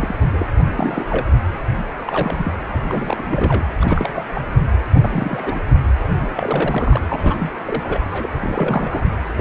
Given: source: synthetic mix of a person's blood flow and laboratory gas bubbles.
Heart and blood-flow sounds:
Doppler ultrasound of blood flow; precordium
0.00-0.16 s: bubbles
0.32-0.46 s: bubbles
0.66-0.71 s: bubbles
0.75-1.06 s: bubbles
1.09-1.26 s: bubbles
2.07-2.52 s: bubbles
2.88-3.67 s: bubbles
3.80-4.23 s: bubbles
4.34-4.41 s: bubbles
4.95-5.59 s: bubbles
5.70-5.76 s: bubbles
6.22-6.27 s: bubbles
6.36-7.01 s: bubbles
7.06-7.50 s: bubbles
7.65-8.00 s: bubbles
8.11-8.29 s: bubbles
8.40-9.02 s: bubbles
9.36-9.41 s: bubbles
From the record:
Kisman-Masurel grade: 342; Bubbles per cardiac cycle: rolling drumbeat, 9 or more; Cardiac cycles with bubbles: 100%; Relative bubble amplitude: moderate (0.250 to 0.450); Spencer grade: 3 (all of the cardiac periods contain showers or single bubble signals, but not dominating or overriding the cardiac motion signals); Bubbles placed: anywhere in the cardiac cycle

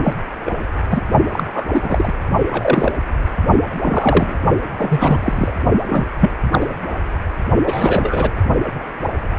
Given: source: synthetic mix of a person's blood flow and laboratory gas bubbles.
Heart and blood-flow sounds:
Doppler ultrasound of blood flow; precordium
0.03-0.13 s: bubbles
0.45-0.51 s: bubbles
0.89-1.01 s: bubbles
1.31-1.44 s: bubbles
1.54-1.66 s: bubbles
1.73-2.13 s: bubbles
2.51-2.92 s: bubbles
3.82-4.39 s: bubbles
4.79-5.19 s: bubbles
5.23-5.53 s: bubbles
5.89-6.06 s: bubbles
6.20-6.31 s: bubbles
6.51-6.67 s: bubbles
7.66-8.30 s: bubbles
From the record:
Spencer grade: 3 (all of the cardiac periods contain showers or single bubble signals, but not dominating or overriding the cardiac motion signals); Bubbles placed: only in the low amplitude regions of the cardiac cycle

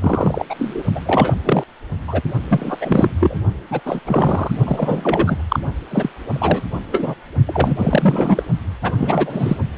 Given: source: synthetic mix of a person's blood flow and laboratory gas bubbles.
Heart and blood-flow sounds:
Doppler ultrasound of blood flow; precordium
0.00-0.44 s: bubbles
0.49-0.54 s: bubbles
0.58-0.82 s: bubbles
0.95-1.01 s: bubbles
1.05-1.33 s: bubbles
1.44-1.64 s: bubbles
2.07-2.21 s: bubbles
2.48-2.77 s: bubbles
2.80-3.11 s: bubbles
3.19-3.40 s: bubbles
3.70-3.80 s: bubbles
3.84-4.00 s: bubbles
4.06-4.51 s: bubbles
4.64-5.43 s: bubbles
5.48-5.59 s: bubbles
5.89-6.09 s: bubbles
6.33-6.62 s: bubbles
6.92-7.14 s: bubbles
7.46-7.75 s: bubbles
7.78-8.43 s: bubbles
8.82-8.92 s: bubbles
8.96-9.57 s: bubbles
From the record:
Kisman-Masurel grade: 343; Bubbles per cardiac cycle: rolling drumbeat, 9 or more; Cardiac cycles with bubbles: 100%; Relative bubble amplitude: loud (0.450 to 0.775); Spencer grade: 3 (all of the cardiac periods contain showers or single bubble signals, but not dominating or overriding the cardiac motion signals); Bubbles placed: only in the low amplitude regions of the cardiac cycle

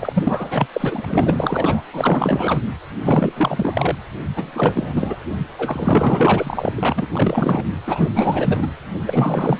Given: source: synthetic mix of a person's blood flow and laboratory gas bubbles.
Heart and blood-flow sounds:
Doppler ultrasound of blood flow; precordium
0.00-0.68 s: bubbles
0.72-1.85 s: bubbles
1.92-2.59 s: bubbles
3.04-3.32 s: bubbles
3.35-3.95 s: bubbles
4.35-5.17 s: bubbles
5.58-6.73 s: bubbles
6.77-7.07 s: bubbles
7.12-7.66 s: bubbles
7.86-8.10 s: bubbles
8.14-8.68 s: bubbles
9.07-9.59 s: bubbles
From the record:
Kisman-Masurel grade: 444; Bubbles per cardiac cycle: continuous sound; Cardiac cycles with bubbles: 100%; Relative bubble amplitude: maximal (0.775 to 0.999); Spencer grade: 4 (maximum detectable bubble signal sounding continuously throughout systole and diastole of every cardiac period, and overriding the amplitude of the normal cardiac signals); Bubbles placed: anywhere in the cardiac cycle

